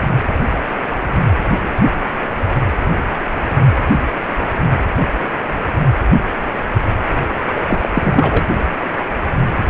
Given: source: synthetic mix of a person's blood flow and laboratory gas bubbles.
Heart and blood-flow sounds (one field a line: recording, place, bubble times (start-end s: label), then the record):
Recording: Doppler ultrasound of blood flow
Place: precordium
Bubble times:
7.54-7.65 s: bubbles
7.68-7.89 s: bubbles
7.95-8.46 s: bubbles
From the record:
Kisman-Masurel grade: 213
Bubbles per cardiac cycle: several, 3 to 8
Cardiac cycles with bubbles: 1 to 10%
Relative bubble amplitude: loud (0.450 to 0.775)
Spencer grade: 1 (occasional bubble signal discernible with the cardiac motion signal, with majority of cardiac periods free of bubbles)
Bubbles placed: anywhere in the cardiac cycle